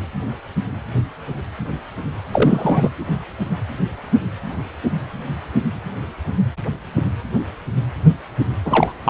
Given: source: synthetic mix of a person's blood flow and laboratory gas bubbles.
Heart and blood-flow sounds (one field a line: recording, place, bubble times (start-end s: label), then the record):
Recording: Doppler ultrasound of blood flow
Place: precordium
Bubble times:
2.31-2.91 s: bubbles
8.64-8.93 s: bubbles
9.05-9.10 s: bubbles
From the record:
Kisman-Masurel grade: 213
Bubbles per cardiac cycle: several, 3 to 8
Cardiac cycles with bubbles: 1 to 10%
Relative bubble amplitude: loud (0.450 to 0.775)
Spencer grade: 1 (occasional bubble signal discernible with the cardiac motion signal, with majority of cardiac periods free of bubbles)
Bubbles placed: anywhere in the cardiac cycle